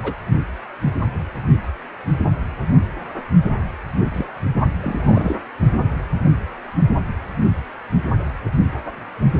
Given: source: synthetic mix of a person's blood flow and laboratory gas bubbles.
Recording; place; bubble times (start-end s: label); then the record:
Doppler ultrasound of blood flow; precordium
0.03-0.15 s: bubbles
4.13-4.26 s: bubbles
4.55-4.69 s: bubbles
4.82-5.36 s: bubbles
From the record:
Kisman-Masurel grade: 222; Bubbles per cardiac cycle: several, 3 to 8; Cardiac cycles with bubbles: 10 to 50%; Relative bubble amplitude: moderate (0.250 to 0.450); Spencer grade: 2 (many but less than half of the cardiac periods contain bubble signals, singularly or in groups); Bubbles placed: only in the low amplitude regions of the cardiac cycle